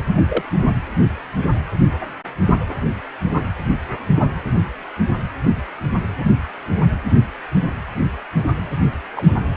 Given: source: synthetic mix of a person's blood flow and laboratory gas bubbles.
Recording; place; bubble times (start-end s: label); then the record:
Doppler ultrasound of blood flow; precordium
0.28-0.43 s: bubbles
9.15-9.22 s: bubbles
From the record:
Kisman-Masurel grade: 122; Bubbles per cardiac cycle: 1 to 2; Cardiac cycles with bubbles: 10 to 50%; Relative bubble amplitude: moderate (0.250 to 0.450); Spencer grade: 2 (many but less than half of the cardiac periods contain bubble signals, singularly or in groups); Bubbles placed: anywhere in the cardiac cycle